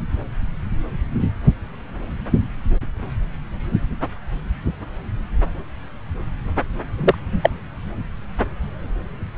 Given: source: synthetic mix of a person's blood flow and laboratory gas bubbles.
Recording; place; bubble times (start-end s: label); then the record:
Doppler ultrasound of blood flow; subclavian vein
6.97-7.14 s: bubbles
7.42-7.50 s: bubbles
From the record:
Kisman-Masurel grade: 113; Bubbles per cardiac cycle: 1 to 2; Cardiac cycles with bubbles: 1 to 10%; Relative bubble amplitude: loud (0.450 to 0.775); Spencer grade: 1 (occasional bubble signal discernible with the cardiac motion signal, with majority of cardiac periods free of bubbles); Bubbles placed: anywhere in the cardiac cycle